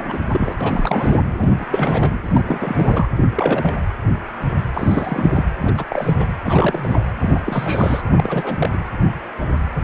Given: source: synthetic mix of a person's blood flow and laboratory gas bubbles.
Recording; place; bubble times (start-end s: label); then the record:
Doppler ultrasound of blood flow; precordium
0.00-0.19 s: bubbles
0.32-0.56 s: bubbles
0.60-1.17 s: bubbles
1.40-1.50 s: bubbles
1.58-1.66 s: bubbles
1.70-2.16 s: bubbles
2.26-2.43 s: bubbles
2.47-3.08 s: bubbles
3.17-3.27 s: bubbles
3.35-3.74 s: bubbles
4.74-5.44 s: bubbles
5.60-5.73 s: bubbles
5.77-5.85 s: bubbles
5.90-6.25 s: bubbles
6.44-7.00 s: bubbles
7.19-7.42 s: bubbles
7.46-8.03 s: bubbles
8.16-8.70 s: bubbles
8.73-8.79 s: bubbles
9.80-9.84 s: bubbles
From the record:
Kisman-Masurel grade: 332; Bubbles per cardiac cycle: rolling drumbeat, 9 or more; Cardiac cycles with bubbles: 50 to 99%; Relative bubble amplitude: moderate (0.250 to 0.450); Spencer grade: 3 (all of the cardiac periods contain showers or single bubble signals, but not dominating or overriding the cardiac motion signals); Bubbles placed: anywhere in the cardiac cycle